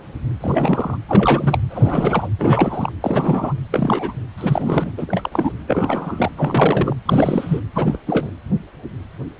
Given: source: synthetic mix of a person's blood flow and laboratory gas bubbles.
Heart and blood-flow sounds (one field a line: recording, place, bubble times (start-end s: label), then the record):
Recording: Doppler ultrasound of blood flow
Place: precordium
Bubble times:
0.41-0.97 s: bubbles
1.08-1.58 s: bubbles
1.70-2.28 s: bubbles
2.38-2.92 s: bubbles
3.00-3.53 s: bubbles
3.71-4.13 s: bubbles
4.38-4.92 s: bubbles
4.97-5.53 s: bubbles
5.67-6.32 s: bubbles
6.37-6.96 s: bubbles
7.05-7.61 s: bubbles
7.75-8.01 s: bubbles
8.06-8.29 s: bubbles
From the record:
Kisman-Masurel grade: 332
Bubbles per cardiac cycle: rolling drumbeat, 9 or more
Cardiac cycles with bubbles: 50 to 99%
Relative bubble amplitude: moderate (0.250 to 0.450)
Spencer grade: 3 (all of the cardiac periods contain showers or single bubble signals, but not dominating or overriding the cardiac motion signals)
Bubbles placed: anywhere in the cardiac cycle